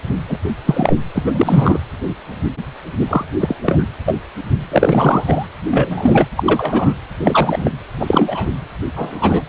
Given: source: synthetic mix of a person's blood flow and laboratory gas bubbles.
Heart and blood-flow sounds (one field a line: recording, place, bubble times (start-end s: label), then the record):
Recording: Doppler ultrasound of blood flow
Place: precordium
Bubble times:
0.28-0.39 s: bubbles
0.65-0.96 s: bubbles
1.15-1.78 s: bubbles
3.08-3.25 s: bubbles
3.39-3.56 s: bubbles
3.63-3.88 s: bubbles
4.05-4.16 s: bubbles
4.71-5.47 s: bubbles
5.71-6.26 s: bubbles
6.36-6.94 s: bubbles
7.18-7.71 s: bubbles
8.00-8.49 s: bubbles
8.96-9.43 s: bubbles
From the record:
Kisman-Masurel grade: 233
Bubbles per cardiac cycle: several, 3 to 8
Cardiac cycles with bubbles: 50 to 99%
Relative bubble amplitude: loud (0.450 to 0.775)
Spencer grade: 3 (all of the cardiac periods contain showers or single bubble signals, but not dominating or overriding the cardiac motion signals)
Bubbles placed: anywhere in the cardiac cycle